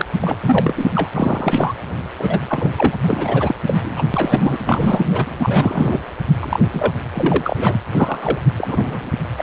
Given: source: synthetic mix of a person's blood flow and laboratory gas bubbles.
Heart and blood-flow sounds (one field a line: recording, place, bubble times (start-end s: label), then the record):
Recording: Doppler ultrasound of blood flow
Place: precordium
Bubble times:
0.00-0.06 s: bubbles
0.20-0.37 s: bubbles
0.43-0.86 s: bubbles
0.95-1.09 s: bubbles
1.14-1.74 s: bubbles
2.18-2.40 s: bubbles
2.48-2.71 s: bubbles
2.77-2.96 s: bubbles
3.06-3.55 s: bubbles
3.67-4.03 s: bubbles
4.14-4.60 s: bubbles
4.66-5.26 s: bubbles
5.39-5.99 s: bubbles
6.40-6.60 s: bubbles
6.73-6.92 s: bubbles
7.14-7.81 s: bubbles
7.92-8.40 s: bubbles
8.57-9.10 s: bubbles
9.38-9.43 s: bubbles
From the record:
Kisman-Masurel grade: 243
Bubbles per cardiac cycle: several, 3 to 8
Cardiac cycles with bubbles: 100%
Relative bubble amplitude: loud (0.450 to 0.775)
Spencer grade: 3 (all of the cardiac periods contain showers or single bubble signals, but not dominating or overriding the cardiac motion signals)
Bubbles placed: anywhere in the cardiac cycle